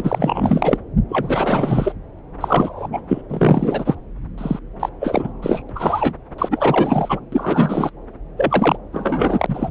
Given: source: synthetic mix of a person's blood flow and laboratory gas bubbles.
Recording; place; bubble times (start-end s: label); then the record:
Doppler ultrasound of blood flow; subclavian vein
0.00-0.77 s: bubbles
1.08-1.93 s: bubbles
2.41-2.88 s: bubbles
2.92-3.00 s: bubbles
3.08-3.21 s: bubbles
3.29-3.95 s: bubbles
4.38-4.59 s: bubbles
4.79-4.89 s: bubbles
5.00-5.32 s: bubbles
5.42-5.62 s: bubbles
5.75-6.12 s: bubbles
6.38-7.20 s: bubbles
7.32-7.90 s: bubbles
8.37-8.78 s: bubbles
8.93-9.46 s: bubbles
9.48-9.71 s: bubbles
From the record:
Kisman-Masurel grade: 343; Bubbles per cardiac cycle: rolling drumbeat, 9 or more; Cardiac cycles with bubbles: 100%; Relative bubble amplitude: loud (0.450 to 0.775); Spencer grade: 3 (all of the cardiac periods contain showers or single bubble signals, but not dominating or overriding the cardiac motion signals); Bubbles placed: anywhere in the cardiac cycle